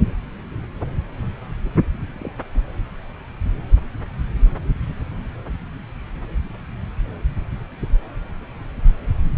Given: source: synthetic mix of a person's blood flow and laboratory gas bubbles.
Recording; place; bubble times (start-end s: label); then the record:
Doppler ultrasound of blood flow; subclavian vein
2.15-2.33 s: bubbles
2.54-2.62 s: bubbles
From the record:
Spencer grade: 1 (occasional bubble signal discernible with the cardiac motion signal, with majority of cardiac periods free of bubbles); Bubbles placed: anywhere in the cardiac cycle